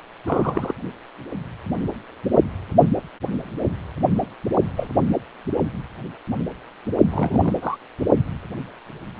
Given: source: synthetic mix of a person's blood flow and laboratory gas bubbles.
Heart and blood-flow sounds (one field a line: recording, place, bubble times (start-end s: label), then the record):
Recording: Doppler ultrasound of blood flow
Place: precordium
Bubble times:
0.27-0.73 s: bubbles
4.76-4.88 s: bubbles
7.10-7.52 s: bubbles
7.61-7.77 s: bubbles
From the record:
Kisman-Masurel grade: 122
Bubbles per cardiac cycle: 1 to 2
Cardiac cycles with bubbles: 10 to 50%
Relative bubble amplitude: moderate (0.250 to 0.450)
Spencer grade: 2 (many but less than half of the cardiac periods contain bubble signals, singularly or in groups)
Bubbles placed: only in the low amplitude regions of the cardiac cycle